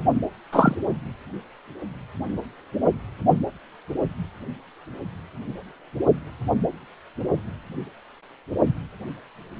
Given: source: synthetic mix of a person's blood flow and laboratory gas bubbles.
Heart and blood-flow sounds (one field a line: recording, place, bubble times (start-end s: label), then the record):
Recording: Doppler ultrasound of blood flow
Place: precordium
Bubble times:
0.52-0.75 s: bubbles
From the record:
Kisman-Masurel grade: 113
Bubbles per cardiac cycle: 1 to 2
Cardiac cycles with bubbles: 1 to 10%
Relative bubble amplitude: loud (0.450 to 0.775)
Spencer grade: 1 (occasional bubble signal discernible with the cardiac motion signal, with majority of cardiac periods free of bubbles)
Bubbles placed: only in the low amplitude regions of the cardiac cycle